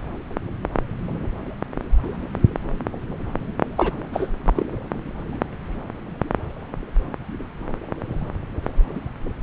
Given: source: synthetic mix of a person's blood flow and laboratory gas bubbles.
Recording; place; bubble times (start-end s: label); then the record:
Doppler ultrasound of blood flow; subclavian vein
3.78-3.92 s: bubbles
4.12-4.28 s: bubbles
4.46-4.53 s: bubbles
4.56-4.66 s: bubbles
From the record:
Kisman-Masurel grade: 212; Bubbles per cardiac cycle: several, 3 to 8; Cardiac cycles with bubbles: 1 to 10%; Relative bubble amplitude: moderate (0.250 to 0.450); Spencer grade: 1 (occasional bubble signal discernible with the cardiac motion signal, with majority of cardiac periods free of bubbles); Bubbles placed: anywhere in the cardiac cycle